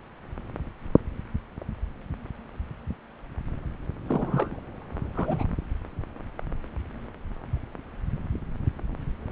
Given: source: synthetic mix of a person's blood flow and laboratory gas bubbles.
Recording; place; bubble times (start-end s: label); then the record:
Doppler ultrasound of blood flow; subclavian vein
4.06-4.60 s: bubbles
5.15-5.45 s: bubbles
From the record:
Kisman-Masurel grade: 212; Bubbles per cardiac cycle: several, 3 to 8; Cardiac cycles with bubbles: 1 to 10%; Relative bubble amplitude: moderate (0.250 to 0.450); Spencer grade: 1 (occasional bubble signal discernible with the cardiac motion signal, with majority of cardiac periods free of bubbles); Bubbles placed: anywhere in the cardiac cycle